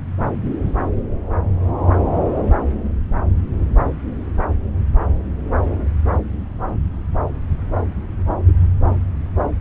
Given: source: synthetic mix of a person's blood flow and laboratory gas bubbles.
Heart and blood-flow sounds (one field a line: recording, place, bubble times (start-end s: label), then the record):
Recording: Doppler ultrasound of blood flow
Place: subclavian vein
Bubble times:
8.47-8.53 s: bubbles
From the record:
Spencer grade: 1 (occasional bubble signal discernible with the cardiac motion signal, with majority of cardiac periods free of bubbles)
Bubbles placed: anywhere in the cardiac cycle